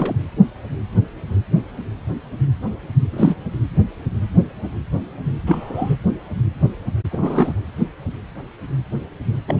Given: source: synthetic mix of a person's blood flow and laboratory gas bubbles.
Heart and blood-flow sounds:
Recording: Doppler ultrasound of blood flow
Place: precordium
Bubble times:
0.00-0.16 s: bubbles
3.11-3.36 s: bubbles
5.46-5.96 s: bubbles
7.11-7.60 s: bubbles
9.48-9.60 s: bubbles
From the record:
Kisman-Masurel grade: 222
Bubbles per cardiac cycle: several, 3 to 8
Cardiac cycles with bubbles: 10 to 50%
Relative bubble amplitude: moderate (0.250 to 0.450)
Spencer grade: 2 (many but less than half of the cardiac periods contain bubble signals, singularly or in groups)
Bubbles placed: anywhere in the cardiac cycle

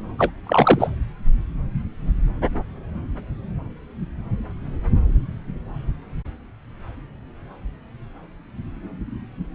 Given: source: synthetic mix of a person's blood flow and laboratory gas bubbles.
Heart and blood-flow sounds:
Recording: Doppler ultrasound of blood flow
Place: subclavian vein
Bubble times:
0.18-0.31 s: bubbles
0.46-0.90 s: bubbles
From the record:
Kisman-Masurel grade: 213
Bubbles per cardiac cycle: several, 3 to 8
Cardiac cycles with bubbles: 1 to 10%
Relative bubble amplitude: loud (0.450 to 0.775)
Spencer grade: 1 (occasional bubble signal discernible with the cardiac motion signal, with majority of cardiac periods free of bubbles)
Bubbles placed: anywhere in the cardiac cycle

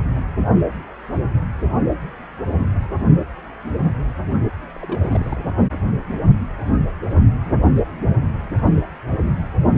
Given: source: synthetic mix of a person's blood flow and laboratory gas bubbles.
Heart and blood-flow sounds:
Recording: Doppler ultrasound of blood flow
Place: precordium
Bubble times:
4.79-5.47 s: bubbles
From the record:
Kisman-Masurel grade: 221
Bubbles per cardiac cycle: several, 3 to 8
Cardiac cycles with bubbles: 10 to 50%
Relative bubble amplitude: barely perceptible (0.100 to 0.250)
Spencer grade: 2 (many but less than half of the cardiac periods contain bubble signals, singularly or in groups)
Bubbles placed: only in the low amplitude regions of the cardiac cycle

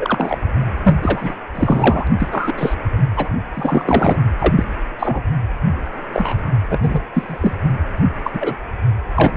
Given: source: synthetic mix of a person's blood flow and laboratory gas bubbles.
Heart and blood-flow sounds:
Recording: Doppler ultrasound of blood flow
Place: precordium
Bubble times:
0.00-0.38 s: bubbles
0.83-0.95 s: bubbles
1.02-1.34 s: bubbles
1.55-2.10 s: bubbles
2.19-2.54 s: bubbles
2.58-2.75 s: bubbles
3.17-3.29 s: bubbles
3.55-4.17 s: bubbles
4.39-4.63 s: bubbles
4.99-5.22 s: bubbles
6.13-6.52 s: bubbles
6.70-6.79 s: bubbles
6.82-7.00 s: bubbles
7.13-7.56 s: bubbles
8.24-8.54 s: bubbles
9.14-9.31 s: bubbles
From the record:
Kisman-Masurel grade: 243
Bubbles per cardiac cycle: several, 3 to 8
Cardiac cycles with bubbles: 100%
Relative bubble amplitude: loud (0.450 to 0.775)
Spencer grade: 3 (all of the cardiac periods contain showers or single bubble signals, but not dominating or overriding the cardiac motion signals)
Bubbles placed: anywhere in the cardiac cycle

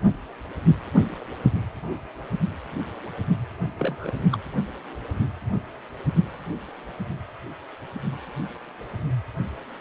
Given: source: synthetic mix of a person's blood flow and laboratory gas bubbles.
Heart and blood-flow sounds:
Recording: Doppler ultrasound of blood flow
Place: precordium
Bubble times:
3.78-4.12 s: bubbles
4.32-4.38 s: bubbles
From the record:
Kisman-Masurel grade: 121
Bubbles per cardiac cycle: 1 to 2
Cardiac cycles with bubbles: 10 to 50%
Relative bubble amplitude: barely perceptible (0.100 to 0.250)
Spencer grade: 2 (many but less than half of the cardiac periods contain bubble signals, singularly or in groups)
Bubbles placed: only in the low amplitude regions of the cardiac cycle

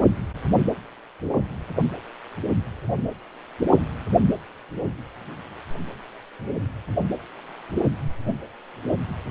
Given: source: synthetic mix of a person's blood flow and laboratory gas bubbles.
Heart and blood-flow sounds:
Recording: Doppler ultrasound of blood flow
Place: precordium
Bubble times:
no bubbles
From the record:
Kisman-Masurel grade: 000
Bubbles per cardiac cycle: 0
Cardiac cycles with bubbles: 0%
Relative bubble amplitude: no bubbles discernible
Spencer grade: 0 (complete lack of bubble signals)

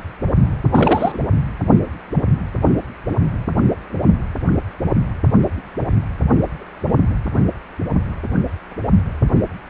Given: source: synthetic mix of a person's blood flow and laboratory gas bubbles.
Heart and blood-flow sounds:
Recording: Doppler ultrasound of blood flow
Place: precordium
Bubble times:
0.73-1.18 s: bubbles
From the record:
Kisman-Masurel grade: 212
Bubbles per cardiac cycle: several, 3 to 8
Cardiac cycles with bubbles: 1 to 10%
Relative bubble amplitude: moderate (0.250 to 0.450)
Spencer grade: 1 (occasional bubble signal discernible with the cardiac motion signal, with majority of cardiac periods free of bubbles)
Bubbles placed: anywhere in the cardiac cycle

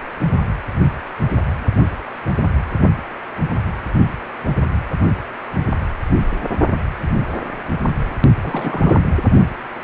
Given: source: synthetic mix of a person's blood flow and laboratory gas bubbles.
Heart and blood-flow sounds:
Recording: Doppler ultrasound of blood flow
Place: precordium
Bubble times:
8.40-9.02 s: bubbles
From the record:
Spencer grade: 1 (occasional bubble signal discernible with the cardiac motion signal, with majority of cardiac periods free of bubbles)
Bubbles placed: only in the low amplitude regions of the cardiac cycle

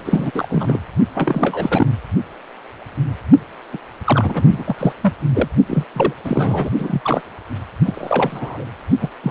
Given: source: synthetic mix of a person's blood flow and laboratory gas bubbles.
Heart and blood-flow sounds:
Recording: Doppler ultrasound of blood flow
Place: precordium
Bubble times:
0.05-0.80 s: bubbles
1.14-1.87 s: bubbles
3.72-3.78 s: bubbles
4.04-4.63 s: bubbles
4.66-4.75 s: bubbles
4.78-4.93 s: bubbles
5.02-5.13 s: bubbles
5.34-5.48 s: bubbles
5.67-5.84 s: bubbles
5.92-6.13 s: bubbles
6.23-6.70 s: bubbles
6.78-7.21 s: bubbles
7.86-8.65 s: bubbles
9.00-9.08 s: bubbles
9.23-9.31 s: bubbles
From the record:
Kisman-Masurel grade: 332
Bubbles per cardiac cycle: rolling drumbeat, 9 or more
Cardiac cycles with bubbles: 50 to 99%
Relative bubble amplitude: moderate (0.250 to 0.450)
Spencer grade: 3 (all of the cardiac periods contain showers or single bubble signals, but not dominating or overriding the cardiac motion signals)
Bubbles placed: only in the low amplitude regions of the cardiac cycle

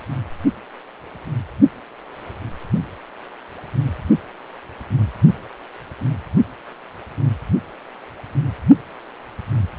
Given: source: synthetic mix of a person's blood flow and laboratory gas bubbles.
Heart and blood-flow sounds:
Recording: Doppler ultrasound of blood flow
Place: precordium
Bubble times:
no bubbles
From the record:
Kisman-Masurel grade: 000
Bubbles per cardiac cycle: 0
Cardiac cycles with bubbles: 0%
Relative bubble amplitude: no bubbles discernible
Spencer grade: 0 (complete lack of bubble signals)

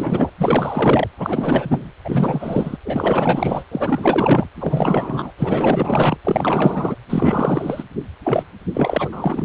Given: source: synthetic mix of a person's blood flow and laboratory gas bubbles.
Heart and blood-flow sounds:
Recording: Doppler ultrasound of blood flow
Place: precordium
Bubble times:
0.00-0.32 s: bubbles
0.38-1.08 s: bubbles
1.17-1.92 s: bubbles
2.04-2.77 s: bubbles
2.85-3.65 s: bubbles
3.71-4.47 s: bubbles
4.57-5.33 s: bubbles
5.37-6.17 s: bubbles
6.24-6.96 s: bubbles
7.09-7.84 s: bubbles
8.23-8.43 s: bubbles
8.74-9.45 s: bubbles
From the record:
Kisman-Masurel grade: 444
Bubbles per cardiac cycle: continuous sound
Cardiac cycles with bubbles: 100%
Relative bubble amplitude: maximal (0.775 to 0.999)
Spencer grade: 4 (maximum detectable bubble signal sounding continuously throughout systole and diastole of every cardiac period, and overriding the amplitude of the normal cardiac signals)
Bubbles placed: anywhere in the cardiac cycle

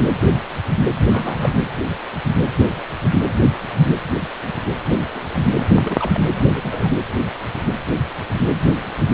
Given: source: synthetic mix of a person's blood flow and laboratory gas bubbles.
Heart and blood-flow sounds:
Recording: Doppler ultrasound of blood flow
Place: precordium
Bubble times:
0.00-0.10 s: bubbles
1.12-1.55 s: bubbles
4.87-5.11 s: bubbles
5.14-5.20 s: bubbles
5.34-5.40 s: bubbles
5.84-6.21 s: bubbles
6.54-6.91 s: bubbles
From the record:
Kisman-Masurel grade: 221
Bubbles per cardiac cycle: several, 3 to 8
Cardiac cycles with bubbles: 10 to 50%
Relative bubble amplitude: barely perceptible (0.100 to 0.250)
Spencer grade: 2 (many but less than half of the cardiac periods contain bubble signals, singularly or in groups)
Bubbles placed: anywhere in the cardiac cycle

